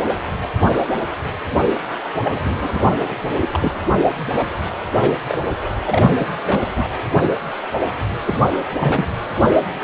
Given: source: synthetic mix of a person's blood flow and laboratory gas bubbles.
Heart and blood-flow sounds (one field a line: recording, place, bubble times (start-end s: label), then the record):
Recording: Doppler ultrasound of blood flow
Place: precordium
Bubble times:
2.23-2.40 s: bubbles
2.43-2.85 s: bubbles
3.08-3.16 s: bubbles
3.39-3.85 s: bubbles
4.32-4.53 s: bubbles
4.98-5.18 s: bubbles
5.29-5.38 s: bubbles
5.85-6.10 s: bubbles
6.19-6.31 s: bubbles
6.46-6.90 s: bubbles
8.26-8.38 s: bubbles
8.79-9.05 s: bubbles
From the record:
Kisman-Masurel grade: 232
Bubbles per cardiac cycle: several, 3 to 8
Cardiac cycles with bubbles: 50 to 99%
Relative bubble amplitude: moderate (0.250 to 0.450)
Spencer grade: 3 (all of the cardiac periods contain showers or single bubble signals, but not dominating or overriding the cardiac motion signals)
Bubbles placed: anywhere in the cardiac cycle